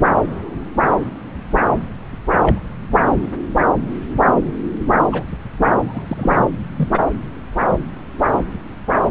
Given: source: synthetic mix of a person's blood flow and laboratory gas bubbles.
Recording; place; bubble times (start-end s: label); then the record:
Doppler ultrasound of blood flow; subclavian vein
0.04-0.12 s: bubbles
2.37-2.60 s: bubbles
5.11-5.23 s: bubbles
5.71-5.76 s: bubbles
5.79-6.42 s: bubbles
6.77-6.88 s: bubbles
6.92-7.00 s: bubbles
From the record:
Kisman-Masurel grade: 122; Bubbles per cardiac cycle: 1 to 2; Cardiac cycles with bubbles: 10 to 50%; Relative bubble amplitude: moderate (0.250 to 0.450); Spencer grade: 2 (many but less than half of the cardiac periods contain bubble signals, singularly or in groups); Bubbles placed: anywhere in the cardiac cycle